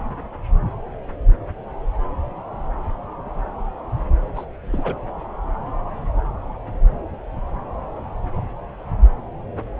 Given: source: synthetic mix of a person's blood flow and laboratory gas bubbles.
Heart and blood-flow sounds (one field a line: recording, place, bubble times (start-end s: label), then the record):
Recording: Doppler ultrasound of blood flow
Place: subclavian vein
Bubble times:
4.35-4.45 s: bubbles
4.72-4.96 s: bubbles
From the record:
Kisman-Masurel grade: 212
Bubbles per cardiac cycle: several, 3 to 8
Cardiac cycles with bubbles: 1 to 10%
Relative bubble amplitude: moderate (0.250 to 0.450)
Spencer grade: 1 (occasional bubble signal discernible with the cardiac motion signal, with majority of cardiac periods free of bubbles)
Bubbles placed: anywhere in the cardiac cycle